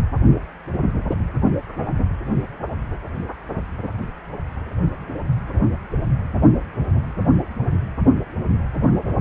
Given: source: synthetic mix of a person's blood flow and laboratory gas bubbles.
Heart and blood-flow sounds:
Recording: Doppler ultrasound of blood flow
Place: precordium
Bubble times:
no bubbles
From the record:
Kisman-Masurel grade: 000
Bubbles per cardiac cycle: 0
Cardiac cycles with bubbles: 0%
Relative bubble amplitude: no bubbles discernible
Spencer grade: 0 (complete lack of bubble signals)

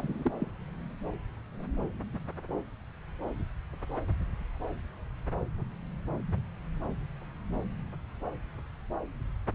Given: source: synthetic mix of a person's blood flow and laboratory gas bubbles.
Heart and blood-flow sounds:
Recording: Doppler ultrasound of blood flow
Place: subclavian vein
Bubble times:
0.00-0.32 s: bubbles
0.39-0.50 s: bubbles
From the record:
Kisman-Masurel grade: 211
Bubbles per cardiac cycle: several, 3 to 8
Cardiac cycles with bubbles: 1 to 10%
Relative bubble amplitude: barely perceptible (0.100 to 0.250)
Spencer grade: 1 (occasional bubble signal discernible with the cardiac motion signal, with majority of cardiac periods free of bubbles)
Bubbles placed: anywhere in the cardiac cycle

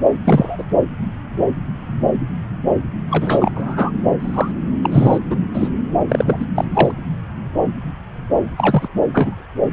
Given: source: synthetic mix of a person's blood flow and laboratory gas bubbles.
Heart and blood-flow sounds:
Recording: Doppler ultrasound of blood flow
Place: subclavian vein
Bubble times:
0.24-0.64 s: bubbles
3.10-3.52 s: bubbles
3.54-3.90 s: bubbles
4.11-4.52 s: bubbles
4.83-5.18 s: bubbles
5.30-5.36 s: bubbles
5.54-5.69 s: bubbles
6.09-6.46 s: bubbles
6.55-6.65 s: bubbles
6.74-6.91 s: bubbles
8.57-8.88 s: bubbles
9.13-9.43 s: bubbles
From the record:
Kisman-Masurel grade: 233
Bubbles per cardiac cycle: several, 3 to 8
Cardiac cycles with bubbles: 50 to 99%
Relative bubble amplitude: loud (0.450 to 0.775)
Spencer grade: 3 (all of the cardiac periods contain showers or single bubble signals, but not dominating or overriding the cardiac motion signals)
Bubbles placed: anywhere in the cardiac cycle

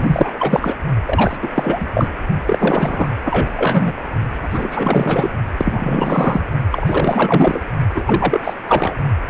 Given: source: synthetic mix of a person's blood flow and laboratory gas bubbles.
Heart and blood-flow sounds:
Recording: Doppler ultrasound of blood flow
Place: precordium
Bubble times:
0.00-0.76 s: bubbles
1.05-1.37 s: bubbles
1.42-1.49 s: bubbles
1.54-1.86 s: bubbles
1.93-2.08 s: bubbles
2.46-3.08 s: bubbles
3.25-3.53 s: bubbles
3.56-3.92 s: bubbles
4.42-5.30 s: bubbles
5.57-6.46 s: bubbles
6.71-7.60 s: bubbles
7.95-8.40 s: bubbles
8.44-8.54 s: bubbles
8.67-8.96 s: bubbles
9.28-9.30 s: bubbles
From the record:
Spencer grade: 4 (maximum detectable bubble signal sounding continuously throughout systole and diastole of every cardiac period, and overriding the amplitude of the normal cardiac signals)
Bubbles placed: only in the low amplitude regions of the cardiac cycle

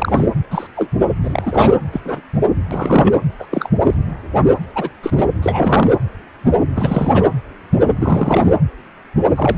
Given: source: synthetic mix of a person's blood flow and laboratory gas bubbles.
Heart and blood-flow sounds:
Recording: Doppler ultrasound of blood flow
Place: precordium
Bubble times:
0.00-0.27 s: bubbles
0.51-0.67 s: bubbles
0.76-0.90 s: bubbles
1.23-1.75 s: bubbles
1.92-2.01 s: bubbles
2.05-2.21 s: bubbles
2.71-3.14 s: bubbles
3.39-3.47 s: bubbles
3.51-3.70 s: bubbles
3.84-3.94 s: bubbles
4.75-4.89 s: bubbles
5.02-5.11 s: bubbles
5.16-5.28 s: bubbles
5.42-5.91 s: bubbles
6.75-7.29 s: bubbles
8.00-8.52 s: bubbles
9.36-9.58 s: bubbles
From the record:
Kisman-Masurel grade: 233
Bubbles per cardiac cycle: several, 3 to 8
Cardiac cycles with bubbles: 50 to 99%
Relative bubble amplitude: loud (0.450 to 0.775)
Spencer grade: 3 (all of the cardiac periods contain showers or single bubble signals, but not dominating or overriding the cardiac motion signals)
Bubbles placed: anywhere in the cardiac cycle

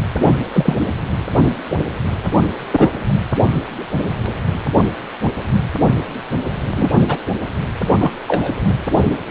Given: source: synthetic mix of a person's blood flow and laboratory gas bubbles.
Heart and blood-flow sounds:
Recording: Doppler ultrasound of blood flow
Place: precordium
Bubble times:
0.15-0.40 s: bubbles
0.52-0.75 s: bubbles
2.71-2.89 s: bubbles
6.75-7.04 s: bubbles
7.08-7.18 s: bubbles
7.99-8.11 s: bubbles
8.28-8.52 s: bubbles
From the record:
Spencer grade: 2 (many but less than half of the cardiac periods contain bubble signals, singularly or in groups)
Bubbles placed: anywhere in the cardiac cycle

